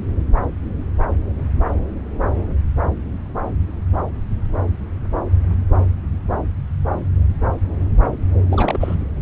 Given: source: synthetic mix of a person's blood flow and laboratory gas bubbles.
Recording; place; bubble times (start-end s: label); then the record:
Doppler ultrasound of blood flow; subclavian vein
8.49-8.95 s: bubbles
From the record:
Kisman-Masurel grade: 212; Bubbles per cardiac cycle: several, 3 to 8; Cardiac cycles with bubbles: 1 to 10%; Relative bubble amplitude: moderate (0.250 to 0.450); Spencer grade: 1 (occasional bubble signal discernible with the cardiac motion signal, with majority of cardiac periods free of bubbles); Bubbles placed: anywhere in the cardiac cycle